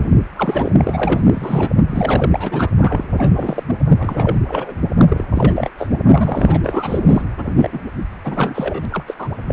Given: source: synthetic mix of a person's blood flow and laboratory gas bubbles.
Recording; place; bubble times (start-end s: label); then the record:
Doppler ultrasound of blood flow; precordium
0.00-0.09 s: bubbles
0.36-0.71 s: bubbles
0.80-1.24 s: bubbles
1.28-1.70 s: bubbles
1.90-2.70 s: bubbles
2.80-3.63 s: bubbles
3.67-3.75 s: bubbles
3.98-4.39 s: bubbles
4.46-4.76 s: bubbles
4.97-5.05 s: bubbles
5.09-5.25 s: bubbles
5.34-5.54 s: bubbles
5.56-5.71 s: bubbles
5.77-5.89 s: bubbles
6.10-6.60 s: bubbles
6.64-7.00 s: bubbles
7.08-7.22 s: bubbles
7.37-7.48 s: bubbles
7.56-7.69 s: bubbles
7.72-7.81 s: bubbles
8.24-8.86 s: bubbles
8.92-9.04 s: bubbles
9.07-9.14 s: bubbles
9.19-9.29 s: bubbles
9.48-9.53 s: bubbles
From the record:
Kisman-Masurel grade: 243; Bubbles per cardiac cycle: several, 3 to 8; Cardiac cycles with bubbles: 100%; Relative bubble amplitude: loud (0.450 to 0.775); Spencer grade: 3 (all of the cardiac periods contain showers or single bubble signals, but not dominating or overriding the cardiac motion signals); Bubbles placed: anywhere in the cardiac cycle